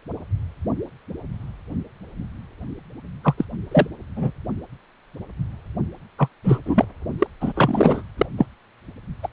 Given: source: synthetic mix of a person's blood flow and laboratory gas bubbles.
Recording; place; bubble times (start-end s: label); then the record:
Doppler ultrasound of blood flow; precordium
3.24-3.35 s: bubbles
3.38-3.45 s: bubbles
3.71-3.87 s: bubbles
4.15-4.31 s: bubbles
6.18-6.28 s: bubbles
6.43-6.59 s: bubbles
6.65-6.85 s: bubbles
7.18-7.27 s: bubbles
7.40-7.52 s: bubbles
7.55-8.02 s: bubbles
8.18-8.26 s: bubbles
8.38-8.46 s: bubbles
9.23-9.28 s: bubbles
From the record:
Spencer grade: 2 (many but less than half of the cardiac periods contain bubble signals, singularly or in groups); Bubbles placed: only in the low amplitude regions of the cardiac cycle